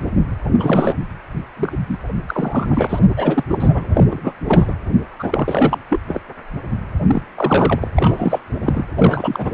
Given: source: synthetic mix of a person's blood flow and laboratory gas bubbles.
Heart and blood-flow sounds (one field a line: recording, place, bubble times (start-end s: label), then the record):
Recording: Doppler ultrasound of blood flow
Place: precordium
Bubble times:
0.59-0.96 s: bubbles
1.56-1.78 s: bubbles
1.88-1.98 s: bubbles
2.28-2.99 s: bubbles
3.17-3.44 s: bubbles
3.50-3.84 s: bubbles
3.93-4.04 s: bubbles
4.09-4.33 s: bubbles
4.47-4.75 s: bubbles
5.19-5.78 s: bubbles
5.89-6.00 s: bubbles
6.08-6.20 s: bubbles
7.07-7.22 s: bubbles
7.35-7.88 s: bubbles
7.96-8.40 s: bubbles
8.62-8.84 s: bubbles
8.99-9.54 s: bubbles
From the record:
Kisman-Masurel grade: 342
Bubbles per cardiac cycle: rolling drumbeat, 9 or more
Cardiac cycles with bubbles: 100%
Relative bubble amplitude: moderate (0.250 to 0.450)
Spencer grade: 3 (all of the cardiac periods contain showers or single bubble signals, but not dominating or overriding the cardiac motion signals)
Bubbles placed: anywhere in the cardiac cycle